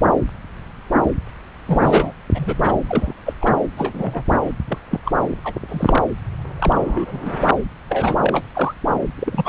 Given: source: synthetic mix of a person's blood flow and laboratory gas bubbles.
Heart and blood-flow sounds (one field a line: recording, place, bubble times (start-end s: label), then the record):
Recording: Doppler ultrasound of blood flow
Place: subclavian vein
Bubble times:
1.67-2.12 s: bubbles
2.34-2.74 s: bubbles
2.87-3.13 s: bubbles
3.25-3.33 s: bubbles
3.41-3.53 s: bubbles
3.77-4.24 s: bubbles
4.31-4.38 s: bubbles
4.45-4.50 s: bubbles
4.68-4.78 s: bubbles
4.91-4.99 s: bubbles
5.05-5.12 s: bubbles
5.44-5.54 s: bubbles
5.69-6.02 s: bubbles
6.59-7.38 s: bubbles
7.89-8.16 s: bubbles
8.21-8.46 s: bubbles
8.54-8.74 s: bubbles
9.17-9.49 s: bubbles
From the record:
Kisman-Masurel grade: 232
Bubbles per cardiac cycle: several, 3 to 8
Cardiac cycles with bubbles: 50 to 99%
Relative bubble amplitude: moderate (0.250 to 0.450)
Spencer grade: 3 (all of the cardiac periods contain showers or single bubble signals, but not dominating or overriding the cardiac motion signals)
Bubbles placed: anywhere in the cardiac cycle